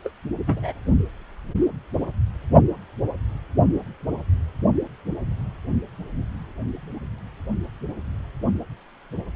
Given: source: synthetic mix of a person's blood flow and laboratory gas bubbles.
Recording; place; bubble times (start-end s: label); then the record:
Doppler ultrasound of blood flow; precordium
0.02-0.09 s: bubbles
0.46-0.73 s: bubbles
From the record:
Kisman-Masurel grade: 211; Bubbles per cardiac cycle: several, 3 to 8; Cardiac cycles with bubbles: 1 to 10%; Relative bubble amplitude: barely perceptible (0.100 to 0.250); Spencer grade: 1 (occasional bubble signal discernible with the cardiac motion signal, with majority of cardiac periods free of bubbles); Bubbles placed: only in the low amplitude regions of the cardiac cycle